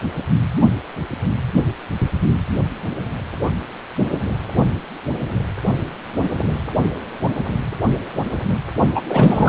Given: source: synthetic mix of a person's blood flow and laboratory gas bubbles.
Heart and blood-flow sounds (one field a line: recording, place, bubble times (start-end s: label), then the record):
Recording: Doppler ultrasound of blood flow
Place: precordium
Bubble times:
8.95-9.02 s: bubbles
9.09-9.49 s: bubbles
From the record:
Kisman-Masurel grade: 213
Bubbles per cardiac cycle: several, 3 to 8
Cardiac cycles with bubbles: 1 to 10%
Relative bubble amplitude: loud (0.450 to 0.775)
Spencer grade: 1 (occasional bubble signal discernible with the cardiac motion signal, with majority of cardiac periods free of bubbles)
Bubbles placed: anywhere in the cardiac cycle